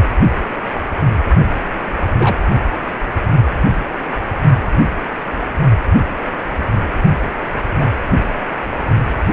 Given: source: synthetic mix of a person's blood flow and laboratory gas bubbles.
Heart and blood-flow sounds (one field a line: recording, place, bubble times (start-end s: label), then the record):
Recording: Doppler ultrasound of blood flow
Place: precordium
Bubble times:
1.96-2.02 s: bubbles
2.18-2.41 s: bubbles
7.79-7.88 s: bubbles
From the record:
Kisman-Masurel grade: 122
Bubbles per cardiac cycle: 1 to 2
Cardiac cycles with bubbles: 10 to 50%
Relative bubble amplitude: moderate (0.250 to 0.450)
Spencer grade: 2 (many but less than half of the cardiac periods contain bubble signals, singularly or in groups)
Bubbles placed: only in the low amplitude regions of the cardiac cycle